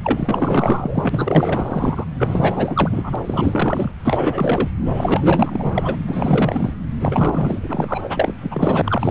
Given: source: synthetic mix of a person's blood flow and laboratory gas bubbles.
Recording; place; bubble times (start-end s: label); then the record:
Doppler ultrasound of blood flow; subclavian vein
0.03-2.04 s: bubbles
2.18-3.16 s: bubbles
3.24-3.92 s: bubbles
4.05-4.69 s: bubbles
4.94-5.96 s: bubbles
6.08-6.74 s: bubbles
6.98-8.01 s: bubbles
8.03-8.36 s: bubbles
8.43-8.82 s: bubbles
8.85-9.11 s: bubbles
From the record:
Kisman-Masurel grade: 444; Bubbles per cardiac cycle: continuous sound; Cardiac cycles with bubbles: 100%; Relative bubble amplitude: maximal (0.775 to 0.999); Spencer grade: 4 (maximum detectable bubble signal sounding continuously throughout systole and diastole of every cardiac period, and overriding the amplitude of the normal cardiac signals); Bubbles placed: anywhere in the cardiac cycle